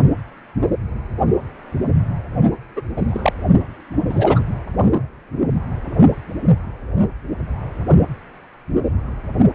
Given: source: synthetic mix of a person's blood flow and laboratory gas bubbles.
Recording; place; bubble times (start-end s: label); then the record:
Doppler ultrasound of blood flow; precordium
2.75-2.81 s: bubbles
2.96-3.06 s: bubbles
3.08-3.33 s: bubbles
4.09-4.42 s: bubbles
From the record:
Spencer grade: 2 (many but less than half of the cardiac periods contain bubble signals, singularly or in groups); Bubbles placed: only in the low amplitude regions of the cardiac cycle